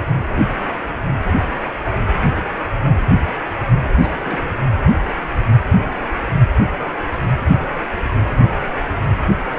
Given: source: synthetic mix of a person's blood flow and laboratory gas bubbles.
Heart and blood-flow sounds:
Doppler ultrasound of blood flow; precordium
3.87-4.58 s: bubbles
From the record:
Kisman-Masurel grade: 211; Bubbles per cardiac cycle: several, 3 to 8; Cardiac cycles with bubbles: 1 to 10%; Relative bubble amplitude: barely perceptible (0.100 to 0.250); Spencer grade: 1 (occasional bubble signal discernible with the cardiac motion signal, with majority of cardiac periods free of bubbles); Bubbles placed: anywhere in the cardiac cycle

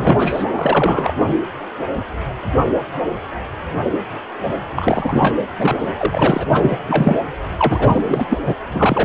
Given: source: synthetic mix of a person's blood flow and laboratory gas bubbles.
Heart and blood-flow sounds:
Doppler ultrasound of blood flow; precordium
0.00-0.44 s: bubbles
0.55-1.15 s: bubbles
1.18-1.27 s: bubbles
4.75-5.34 s: bubbles
5.58-5.88 s: bubbles
5.99-6.46 s: bubbles
6.53-6.83 s: bubbles
6.88-7.18 s: bubbles
7.57-8.42 s: bubbles
8.45-8.55 s: bubbles
8.70-9.05 s: bubbles
From the record:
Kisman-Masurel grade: 333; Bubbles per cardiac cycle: rolling drumbeat, 9 or more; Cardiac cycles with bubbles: 50 to 99%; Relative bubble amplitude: loud (0.450 to 0.775); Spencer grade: 3 (all of the cardiac periods contain showers or single bubble signals, but not dominating or overriding the cardiac motion signals); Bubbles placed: anywhere in the cardiac cycle

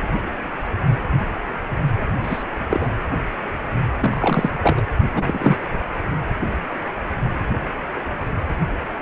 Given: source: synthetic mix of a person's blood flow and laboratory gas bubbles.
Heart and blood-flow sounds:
Doppler ultrasound of blood flow; precordium
2.22-2.44 s: bubbles
2.69-2.89 s: bubbles
3.96-4.50 s: bubbles
4.62-4.87 s: bubbles
5.15-5.57 s: bubbles
From the record:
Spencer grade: 2 (many but less than half of the cardiac periods contain bubble signals, singularly or in groups); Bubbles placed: anywhere in the cardiac cycle

